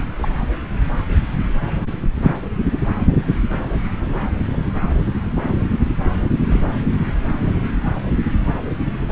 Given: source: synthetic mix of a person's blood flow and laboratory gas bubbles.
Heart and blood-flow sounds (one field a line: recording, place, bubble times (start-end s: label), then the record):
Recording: Doppler ultrasound of blood flow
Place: subclavian vein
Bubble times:
0.17-0.33 s: bubbles
6.48-6.60 s: bubbles
From the record:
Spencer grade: 2 (many but less than half of the cardiac periods contain bubble signals, singularly or in groups)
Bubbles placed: anywhere in the cardiac cycle